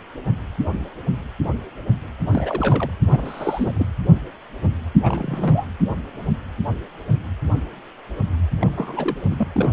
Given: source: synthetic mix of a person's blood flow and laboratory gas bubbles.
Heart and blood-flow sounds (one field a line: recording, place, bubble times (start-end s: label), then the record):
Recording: Doppler ultrasound of blood flow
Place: precordium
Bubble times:
2.23-2.90 s: bubbles
3.06-3.74 s: bubbles
3.76-3.86 s: bubbles
5.03-5.66 s: bubbles
8.61-8.72 s: bubbles
8.76-9.47 s: bubbles
9.54-9.71 s: bubbles
From the record:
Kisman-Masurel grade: 222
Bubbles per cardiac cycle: several, 3 to 8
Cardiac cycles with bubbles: 10 to 50%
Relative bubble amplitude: moderate (0.250 to 0.450)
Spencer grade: 2 (many but less than half of the cardiac periods contain bubble signals, singularly or in groups)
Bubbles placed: anywhere in the cardiac cycle